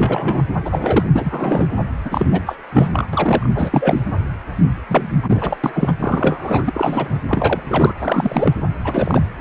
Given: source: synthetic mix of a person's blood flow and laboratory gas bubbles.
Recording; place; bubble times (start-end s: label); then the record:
Doppler ultrasound of blood flow; precordium
0.00-0.43 s: bubbles
0.65-1.06 s: bubbles
1.14-1.67 s: bubbles
2.04-2.27 s: bubbles
2.31-2.43 s: bubbles
2.46-2.56 s: bubbles
2.73-3.08 s: bubbles
3.13-3.50 s: bubbles
3.54-4.00 s: bubbles
4.88-5.12 s: bubbles
5.16-5.57 s: bubbles
5.63-5.93 s: bubbles
6.00-7.20 s: bubbles
7.28-7.95 s: bubbles
7.98-8.53 s: bubbles
8.84-9.21 s: bubbles
9.39-9.41 s: bubbles
From the record:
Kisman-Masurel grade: 343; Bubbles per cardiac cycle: rolling drumbeat, 9 or more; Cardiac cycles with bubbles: 100%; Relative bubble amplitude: loud (0.450 to 0.775); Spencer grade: 3 (all of the cardiac periods contain showers or single bubble signals, but not dominating or overriding the cardiac motion signals); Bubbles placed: anywhere in the cardiac cycle